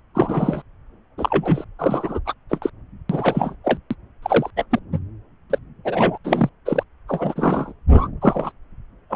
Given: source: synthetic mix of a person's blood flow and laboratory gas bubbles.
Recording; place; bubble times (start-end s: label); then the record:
Doppler ultrasound of blood flow; subclavian vein
0.14-0.62 s: bubbles
1.18-1.65 s: bubbles
1.78-2.19 s: bubbles
2.25-2.33 s: bubbles
2.49-2.58 s: bubbles
2.62-2.70 s: bubbles
3.09-3.55 s: bubbles
3.64-3.78 s: bubbles
3.90-3.94 s: bubbles
4.22-4.50 s: bubbles
4.56-4.65 s: bubbles
4.71-4.79 s: bubbles
4.92-4.99 s: bubbles
5.50-5.58 s: bubbles
5.85-6.18 s: bubbles
6.24-6.49 s: bubbles
6.66-6.83 s: bubbles
7.08-7.72 s: bubbles
7.89-8.08 s: bubbles
8.21-8.52 s: bubbles
9.10-9.16 s: bubbles
From the record:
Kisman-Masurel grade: 243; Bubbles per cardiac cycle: several, 3 to 8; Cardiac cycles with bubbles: 100%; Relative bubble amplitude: loud (0.450 to 0.775); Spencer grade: 3 (all of the cardiac periods contain showers or single bubble signals, but not dominating or overriding the cardiac motion signals); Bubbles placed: anywhere in the cardiac cycle